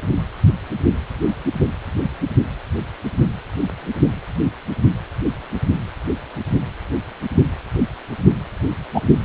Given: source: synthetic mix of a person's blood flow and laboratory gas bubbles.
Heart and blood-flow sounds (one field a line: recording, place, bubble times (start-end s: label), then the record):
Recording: Doppler ultrasound of blood flow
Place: precordium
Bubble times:
8.94-9.02 s: bubbles
From the record:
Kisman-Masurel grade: 113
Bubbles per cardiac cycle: 1 to 2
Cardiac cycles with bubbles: 1 to 10%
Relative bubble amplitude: loud (0.450 to 0.775)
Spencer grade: 1 (occasional bubble signal discernible with the cardiac motion signal, with majority of cardiac periods free of bubbles)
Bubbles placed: only in the low amplitude regions of the cardiac cycle